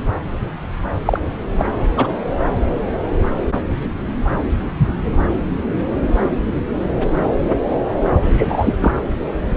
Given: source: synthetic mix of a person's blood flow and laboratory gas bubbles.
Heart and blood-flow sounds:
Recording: Doppler ultrasound of blood flow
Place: subclavian vein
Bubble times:
1.05-1.19 s: bubbles
1.57-1.65 s: bubbles
1.96-2.08 s: bubbles
8.22-8.73 s: bubbles
8.79-8.93 s: bubbles
From the record:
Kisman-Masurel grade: 223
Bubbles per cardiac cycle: several, 3 to 8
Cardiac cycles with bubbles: 10 to 50%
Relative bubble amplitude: loud (0.450 to 0.775)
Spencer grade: 2 (many but less than half of the cardiac periods contain bubble signals, singularly or in groups)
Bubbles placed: anywhere in the cardiac cycle

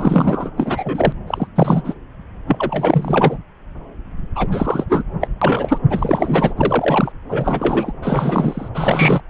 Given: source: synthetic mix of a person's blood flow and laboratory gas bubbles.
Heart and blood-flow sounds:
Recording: Doppler ultrasound of blood flow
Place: subclavian vein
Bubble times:
0.00-0.51 s: bubbles
0.57-1.12 s: bubbles
1.27-1.47 s: bubbles
1.56-1.94 s: bubbles
2.46-3.39 s: bubbles
4.35-4.47 s: bubbles
4.51-4.85 s: bubbles
4.89-5.03 s: bubbles
5.21-5.28 s: bubbles
5.41-5.78 s: bubbles
5.90-6.54 s: bubbles
6.57-7.12 s: bubbles
7.29-7.92 s: bubbles
8.01-8.68 s: bubbles
8.74-9.21 s: bubbles
From the record:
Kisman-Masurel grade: 333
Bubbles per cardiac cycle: rolling drumbeat, 9 or more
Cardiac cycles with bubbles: 50 to 99%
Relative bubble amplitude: loud (0.450 to 0.775)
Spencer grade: 3 (all of the cardiac periods contain showers or single bubble signals, but not dominating or overriding the cardiac motion signals)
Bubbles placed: anywhere in the cardiac cycle

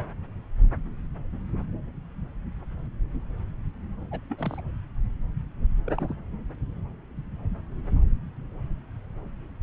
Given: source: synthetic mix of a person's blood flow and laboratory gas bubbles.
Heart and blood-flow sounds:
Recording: Doppler ultrasound of blood flow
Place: subclavian vein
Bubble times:
4.11-4.19 s: bubbles
4.29-4.61 s: bubbles
5.86-5.92 s: bubbles
5.97-6.16 s: bubbles
From the record:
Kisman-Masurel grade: 211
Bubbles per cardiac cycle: several, 3 to 8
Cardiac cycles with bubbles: 1 to 10%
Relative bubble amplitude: barely perceptible (0.100 to 0.250)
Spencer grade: 1 (occasional bubble signal discernible with the cardiac motion signal, with majority of cardiac periods free of bubbles)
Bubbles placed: anywhere in the cardiac cycle

